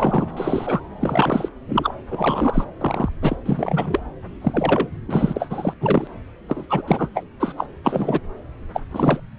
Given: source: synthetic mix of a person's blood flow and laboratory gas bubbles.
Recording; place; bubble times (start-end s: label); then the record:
Doppler ultrasound of blood flow; subclavian vein
0.00-0.27 s: bubbles
0.36-0.81 s: bubbles
1.01-1.49 s: bubbles
1.68-1.93 s: bubbles
2.11-2.64 s: bubbles
2.80-3.09 s: bubbles
3.22-3.37 s: bubbles
3.46-4.00 s: bubbles
4.41-4.88 s: bubbles
5.08-5.73 s: bubbles
5.80-6.08 s: bubbles
6.48-6.65 s: bubbles
6.69-6.82 s: bubbles
6.88-7.09 s: bubbles
7.14-7.24 s: bubbles
7.40-7.53 s: bubbles
7.57-7.66 s: bubbles
7.83-8.21 s: bubbles
8.73-8.81 s: bubbles
8.91-9.20 s: bubbles
From the record:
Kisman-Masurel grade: 342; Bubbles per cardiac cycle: rolling drumbeat, 9 or more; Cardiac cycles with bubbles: 100%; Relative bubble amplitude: moderate (0.250 to 0.450); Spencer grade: 3 (all of the cardiac periods contain showers or single bubble signals, but not dominating or overriding the cardiac motion signals); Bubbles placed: anywhere in the cardiac cycle